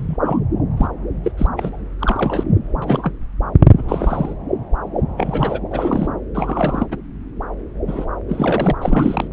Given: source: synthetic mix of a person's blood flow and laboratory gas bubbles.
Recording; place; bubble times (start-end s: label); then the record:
Doppler ultrasound of blood flow; subclavian vein
0.00-0.17 s: bubbles
0.25-0.40 s: bubbles
0.77-0.88 s: bubbles
1.24-1.31 s: bubbles
1.38-1.47 s: bubbles
1.57-1.82 s: bubbles
1.99-2.44 s: bubbles
2.82-3.13 s: bubbles
3.73-4.34 s: bubbles
5.17-5.61 s: bubbles
5.71-6.08 s: bubbles
6.35-6.87 s: bubbles
6.91-6.97 s: bubbles
7.88-8.05 s: bubbles
8.29-8.71 s: bubbles
8.81-9.28 s: bubbles
From the record:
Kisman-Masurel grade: 232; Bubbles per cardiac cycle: several, 3 to 8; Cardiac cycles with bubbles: 50 to 99%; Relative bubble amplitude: moderate (0.250 to 0.450); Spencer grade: 3 (all of the cardiac periods contain showers or single bubble signals, but not dominating or overriding the cardiac motion signals); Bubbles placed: anywhere in the cardiac cycle